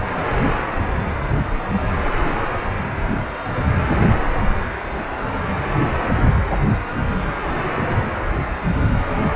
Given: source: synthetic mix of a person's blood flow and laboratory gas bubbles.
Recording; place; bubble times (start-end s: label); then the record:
Doppler ultrasound of blood flow; precordium
9.06-9.21 s: bubbles
From the record:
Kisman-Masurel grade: 121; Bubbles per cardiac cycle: 1 to 2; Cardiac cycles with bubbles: 10 to 50%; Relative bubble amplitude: barely perceptible (0.100 to 0.250); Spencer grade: 2 (many but less than half of the cardiac periods contain bubble signals, singularly or in groups); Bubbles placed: anywhere in the cardiac cycle